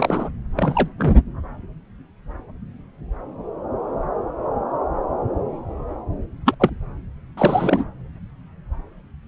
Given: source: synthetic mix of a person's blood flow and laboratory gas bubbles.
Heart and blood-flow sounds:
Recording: Doppler ultrasound of blood flow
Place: subclavian vein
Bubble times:
0.00-0.29 s: bubbles
0.56-0.89 s: bubbles
0.97-1.15 s: bubbles
6.45-6.54 s: bubbles
6.59-6.70 s: bubbles
7.37-7.85 s: bubbles
From the record:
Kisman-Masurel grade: 222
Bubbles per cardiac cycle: several, 3 to 8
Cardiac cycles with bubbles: 10 to 50%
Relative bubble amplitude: moderate (0.250 to 0.450)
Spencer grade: 2 (many but less than half of the cardiac periods contain bubble signals, singularly or in groups)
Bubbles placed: anywhere in the cardiac cycle

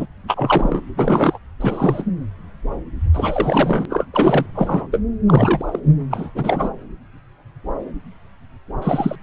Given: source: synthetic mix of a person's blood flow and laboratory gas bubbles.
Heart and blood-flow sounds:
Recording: Doppler ultrasound of blood flow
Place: subclavian vein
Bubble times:
0.00-0.06 s: bubbles
0.28-0.81 s: bubbles
0.96-1.38 s: bubbles
1.60-2.05 s: bubbles
3.14-3.86 s: bubbles
3.89-4.05 s: bubbles
4.13-4.46 s: bubbles
4.54-4.87 s: bubbles
4.92-5.00 s: bubbles
5.27-5.80 s: bubbles
6.10-6.30 s: bubbles
6.34-6.70 s: bubbles
8.81-9.15 s: bubbles
From the record:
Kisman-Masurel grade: 233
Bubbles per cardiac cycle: several, 3 to 8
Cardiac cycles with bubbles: 50 to 99%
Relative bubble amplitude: loud (0.450 to 0.775)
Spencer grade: 3 (all of the cardiac periods contain showers or single bubble signals, but not dominating or overriding the cardiac motion signals)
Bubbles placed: anywhere in the cardiac cycle

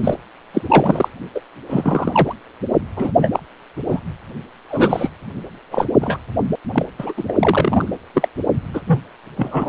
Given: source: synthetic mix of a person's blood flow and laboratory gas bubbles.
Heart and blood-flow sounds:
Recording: Doppler ultrasound of blood flow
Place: precordium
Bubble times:
0.03-0.14 s: bubbles
0.54-0.62 s: bubbles
0.69-1.08 s: bubbles
1.35-1.40 s: bubbles
1.69-2.35 s: bubbles
2.96-3.12 s: bubbles
3.21-3.40 s: bubbles
3.90-3.99 s: bubbles
4.69-5.12 s: bubbles
5.71-5.86 s: bubbles
6.01-6.17 s: bubbles
6.73-6.86 s: bubbles
6.98-7.13 s: bubbles
7.17-7.25 s: bubbles
7.28-7.33 s: bubbles
7.40-7.89 s: bubbles
8.14-8.29 s: bubbles
8.73-8.80 s: bubbles
8.87-9.01 s: bubbles
9.36-9.68 s: bubbles
From the record:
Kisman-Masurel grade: 233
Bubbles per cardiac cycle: several, 3 to 8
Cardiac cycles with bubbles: 50 to 99%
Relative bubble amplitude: loud (0.450 to 0.775)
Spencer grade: 3 (all of the cardiac periods contain showers or single bubble signals, but not dominating or overriding the cardiac motion signals)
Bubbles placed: only in the low amplitude regions of the cardiac cycle

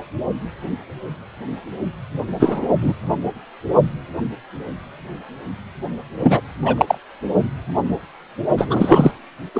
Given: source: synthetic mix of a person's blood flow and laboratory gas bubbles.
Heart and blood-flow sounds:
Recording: Doppler ultrasound of blood flow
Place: precordium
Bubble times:
2.40-2.67 s: bubbles
2.81-2.93 s: bubbles
6.19-6.40 s: bubbles
6.65-6.75 s: bubbles
6.77-6.98 s: bubbles
8.57-9.11 s: bubbles
9.54-9.60 s: bubbles
From the record:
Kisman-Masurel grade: 233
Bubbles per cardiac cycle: several, 3 to 8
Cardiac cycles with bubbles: 50 to 99%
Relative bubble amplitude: loud (0.450 to 0.775)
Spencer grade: 3 (all of the cardiac periods contain showers or single bubble signals, but not dominating or overriding the cardiac motion signals)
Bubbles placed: only in the low amplitude regions of the cardiac cycle

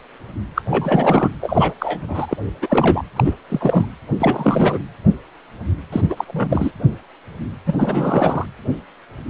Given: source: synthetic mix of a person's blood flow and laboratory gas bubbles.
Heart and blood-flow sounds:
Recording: Doppler ultrasound of blood flow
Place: precordium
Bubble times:
0.55-0.62 s: bubbles
0.70-1.29 s: bubbles
1.41-1.74 s: bubbles
1.79-2.37 s: bubbles
2.62-3.04 s: bubbles
3.16-3.33 s: bubbles
3.48-3.85 s: bubbles
4.19-4.78 s: bubbles
5.92-6.24 s: bubbles
6.27-6.71 s: bubbles
7.66-7.74 s: bubbles
7.78-8.46 s: bubbles
From the record:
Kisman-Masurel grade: 333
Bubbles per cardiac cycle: rolling drumbeat, 9 or more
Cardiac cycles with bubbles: 50 to 99%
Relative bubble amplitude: loud (0.450 to 0.775)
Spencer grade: 3 (all of the cardiac periods contain showers or single bubble signals, but not dominating or overriding the cardiac motion signals)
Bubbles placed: anywhere in the cardiac cycle

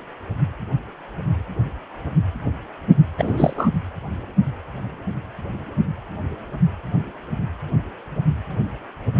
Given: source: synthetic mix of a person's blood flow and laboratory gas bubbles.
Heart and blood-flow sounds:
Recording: Doppler ultrasound of blood flow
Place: precordium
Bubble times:
3.18-3.69 s: bubbles
From the record:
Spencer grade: 1 (occasional bubble signal discernible with the cardiac motion signal, with majority of cardiac periods free of bubbles)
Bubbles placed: anywhere in the cardiac cycle

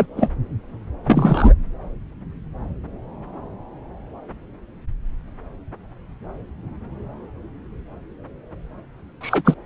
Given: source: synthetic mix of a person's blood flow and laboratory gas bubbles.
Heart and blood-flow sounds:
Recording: Doppler ultrasound of blood flow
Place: subclavian vein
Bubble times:
0.00-0.06 s: bubbles
0.17-0.31 s: bubbles
1.04-1.54 s: bubbles
9.20-9.55 s: bubbles
From the record:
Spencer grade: 2 (many but less than half of the cardiac periods contain bubble signals, singularly or in groups)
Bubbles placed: anywhere in the cardiac cycle

